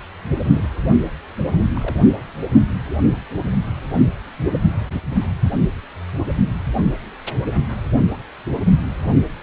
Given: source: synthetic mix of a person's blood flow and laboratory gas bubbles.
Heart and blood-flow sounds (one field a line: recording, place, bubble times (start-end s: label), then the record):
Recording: Doppler ultrasound of blood flow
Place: precordium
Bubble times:
0.52-0.70 s: bubbles
1.74-1.97 s: bubbles
From the record:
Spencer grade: 1 (occasional bubble signal discernible with the cardiac motion signal, with majority of cardiac periods free of bubbles)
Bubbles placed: only in the low amplitude regions of the cardiac cycle